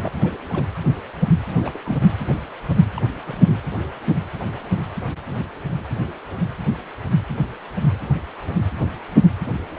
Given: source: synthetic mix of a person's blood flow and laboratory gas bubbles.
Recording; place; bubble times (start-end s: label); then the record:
Doppler ultrasound of blood flow; precordium
0.01-0.12 s: bubbles
0.21-0.38 s: bubbles
0.49-0.65 s: bubbles
1.56-1.79 s: bubbles
1.83-2.09 s: bubbles
2.96-3.00 s: bubbles
3.25-3.61 s: bubbles
From the record:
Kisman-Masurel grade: 221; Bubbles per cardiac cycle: several, 3 to 8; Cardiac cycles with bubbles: 10 to 50%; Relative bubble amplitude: barely perceptible (0.100 to 0.250); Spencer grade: 2 (many but less than half of the cardiac periods contain bubble signals, singularly or in groups); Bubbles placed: anywhere in the cardiac cycle